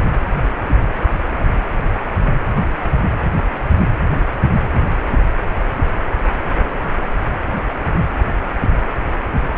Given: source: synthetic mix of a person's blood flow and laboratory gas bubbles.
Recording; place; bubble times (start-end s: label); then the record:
Doppler ultrasound of blood flow; precordium
no bubbles
From the record:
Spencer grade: 0 (complete lack of bubble signals)